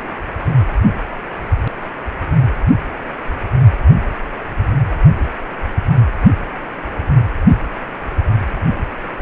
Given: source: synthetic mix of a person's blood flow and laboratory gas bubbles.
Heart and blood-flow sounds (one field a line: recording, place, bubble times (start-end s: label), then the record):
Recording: Doppler ultrasound of blood flow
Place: precordium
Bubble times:
0.43-0.56 s: bubbles
8.54-8.60 s: bubbles
From the record:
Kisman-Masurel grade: 121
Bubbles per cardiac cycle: 1 to 2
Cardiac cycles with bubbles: 10 to 50%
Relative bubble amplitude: barely perceptible (0.100 to 0.250)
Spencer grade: 2 (many but less than half of the cardiac periods contain bubble signals, singularly or in groups)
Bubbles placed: only in the low amplitude regions of the cardiac cycle